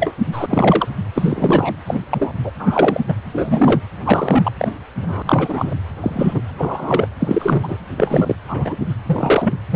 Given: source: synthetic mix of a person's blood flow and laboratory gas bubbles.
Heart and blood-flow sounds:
Doppler ultrasound of blood flow; precordium
0.00-0.12 s: bubbles
0.32-0.46 s: bubbles
0.48-0.88 s: bubbles
1.15-1.76 s: bubbles
1.86-2.00 s: bubbles
2.10-2.35 s: bubbles
2.43-2.50 s: bubbles
2.59-3.00 s: bubbles
3.07-3.15 s: bubbles
3.32-3.81 s: bubbles
4.05-4.52 s: bubbles
4.58-4.72 s: bubbles
5.03-5.23 s: bubbles
5.27-5.75 s: bubbles
6.00-6.42 s: bubbles
6.58-7.08 s: bubbles
7.19-7.78 s: bubbles
7.98-8.35 s: bubbles
8.48-8.77 s: bubbles
9.07-9.54 s: bubbles
9.71-9.76 s: bubbles
From the record:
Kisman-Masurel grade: 243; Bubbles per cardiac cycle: several, 3 to 8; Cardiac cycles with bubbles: 100%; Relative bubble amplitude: loud (0.450 to 0.775); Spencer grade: 3 (all of the cardiac periods contain showers or single bubble signals, but not dominating or overriding the cardiac motion signals); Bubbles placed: anywhere in the cardiac cycle

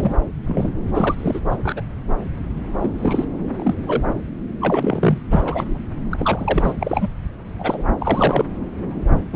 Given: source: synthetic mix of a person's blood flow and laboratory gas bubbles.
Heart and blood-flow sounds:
Doppler ultrasound of blood flow; subclavian vein
0.00-0.14 s: bubbles
0.47-0.71 s: bubbles
0.94-1.40 s: bubbles
1.49-1.57 s: bubbles
1.63-1.82 s: bubbles
2.80-3.26 s: bubbles
3.50-3.75 s: bubbles
3.86-4.04 s: bubbles
4.61-5.18 s: bubbles
5.30-5.79 s: bubbles
6.09-6.72 s: bubbles
6.79-7.08 s: bubbles
7.58-7.84 s: bubbles
7.99-8.45 s: bubbles
9.33-9.36 s: bubbles
From the record:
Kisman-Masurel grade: 233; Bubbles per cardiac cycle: several, 3 to 8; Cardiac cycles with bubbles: 50 to 99%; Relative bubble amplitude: loud (0.450 to 0.775); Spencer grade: 3 (all of the cardiac periods contain showers or single bubble signals, but not dominating or overriding the cardiac motion signals); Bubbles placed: anywhere in the cardiac cycle

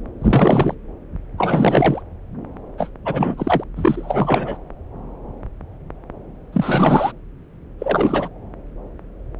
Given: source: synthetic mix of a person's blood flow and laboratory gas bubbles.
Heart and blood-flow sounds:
Doppler ultrasound of blood flow; subclavian vein
0.21-0.74 s: bubbles
1.38-2.02 s: bubbles
2.78-2.90 s: bubbles
3.04-3.64 s: bubbles
3.76-4.57 s: bubbles
6.53-7.12 s: bubbles
7.79-8.29 s: bubbles
From the record:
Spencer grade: 3 (all of the cardiac periods contain showers or single bubble signals, but not dominating or overriding the cardiac motion signals); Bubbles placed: anywhere in the cardiac cycle

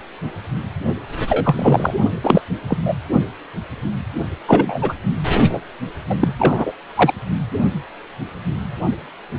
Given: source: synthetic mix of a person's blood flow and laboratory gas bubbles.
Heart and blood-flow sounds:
Doppler ultrasound of blood flow; precordium
1.29-1.94 s: bubbles
2.23-2.42 s: bubbles
2.68-2.77 s: bubbles
2.85-2.94 s: bubbles
4.47-4.94 s: bubbles
5.49-5.59 s: bubbles
6.09-6.16 s: bubbles
6.21-6.33 s: bubbles
6.38-6.72 s: bubbles
6.96-7.13 s: bubbles
From the record:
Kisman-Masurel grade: 233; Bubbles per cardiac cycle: several, 3 to 8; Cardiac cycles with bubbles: 50 to 99%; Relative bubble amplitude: loud (0.450 to 0.775); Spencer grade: 3 (all of the cardiac periods contain showers or single bubble signals, but not dominating or overriding the cardiac motion signals); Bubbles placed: only in the low amplitude regions of the cardiac cycle

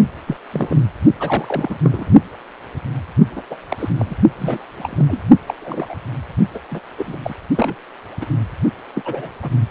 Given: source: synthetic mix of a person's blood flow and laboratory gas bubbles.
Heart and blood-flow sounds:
Doppler ultrasound of blood flow; precordium
0.27-0.36 s: bubbles
0.52-0.77 s: bubbles
1.20-1.78 s: bubbles
1.83-2.10 s: bubbles
3.35-3.42 s: bubbles
3.50-3.55 s: bubbles
3.70-3.90 s: bubbles
3.98-4.15 s: bubbles
4.39-4.66 s: bubbles
4.75-5.22 s: bubbles
5.46-5.54 s: bubbles
5.61-5.95 s: bubbles
6.54-6.58 s: bubbles
6.72-6.79 s: bubbles
6.98-7.17 s: bubbles
7.24-7.34 s: bubbles
7.54-7.75 s: bubbles
8.21-8.26 s: bubbles
8.95-9.02 s: bubbles
9.05-9.29 s: bubbles
9.43-9.49 s: bubbles
From the record:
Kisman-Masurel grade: 242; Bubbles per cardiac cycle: several, 3 to 8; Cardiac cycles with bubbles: 100%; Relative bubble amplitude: moderate (0.250 to 0.450); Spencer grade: 3 (all of the cardiac periods contain showers or single bubble signals, but not dominating or overriding the cardiac motion signals); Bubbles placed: only in the low amplitude regions of the cardiac cycle

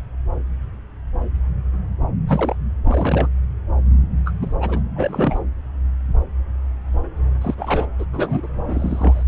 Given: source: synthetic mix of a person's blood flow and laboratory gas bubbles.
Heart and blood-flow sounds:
Doppler ultrasound of blood flow; subclavian vein
2.27-2.56 s: bubbles
2.86-3.29 s: bubbles
4.24-4.32 s: bubbles
4.41-4.55 s: bubbles
4.60-4.80 s: bubbles
4.95-5.41 s: bubbles
7.41-7.55 s: bubbles
7.58-7.88 s: bubbles
7.99-8.04 s: bubbles
8.12-8.47 s: bubbles
8.67-9.23 s: bubbles
From the record:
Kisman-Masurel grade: 232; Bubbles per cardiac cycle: several, 3 to 8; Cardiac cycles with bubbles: 50 to 99%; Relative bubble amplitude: moderate (0.250 to 0.450); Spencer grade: 3 (all of the cardiac periods contain showers or single bubble signals, but not dominating or overriding the cardiac motion signals); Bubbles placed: anywhere in the cardiac cycle

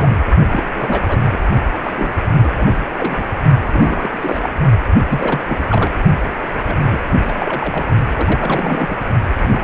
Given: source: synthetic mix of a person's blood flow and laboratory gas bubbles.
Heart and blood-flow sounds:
Doppler ultrasound of blood flow; precordium
0.00-0.16 s: bubbles
0.47-1.19 s: bubbles
1.31-1.38 s: bubbles
1.83-2.13 s: bubbles
2.35-2.53 s: bubbles
2.57-2.77 s: bubbles
2.97-3.25 s: bubbles
3.67-4.49 s: bubbles
5.08-5.41 s: bubbles
5.47-5.64 s: bubbles
5.70-5.92 s: bubbles
6.53-7.02 s: bubbles
7.26-7.86 s: bubbles
8.15-8.98 s: bubbles
9.36-9.63 s: bubbles
From the record:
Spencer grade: 3 (all of the cardiac periods contain showers or single bubble signals, but not dominating or overriding the cardiac motion signals); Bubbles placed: only in the low amplitude regions of the cardiac cycle

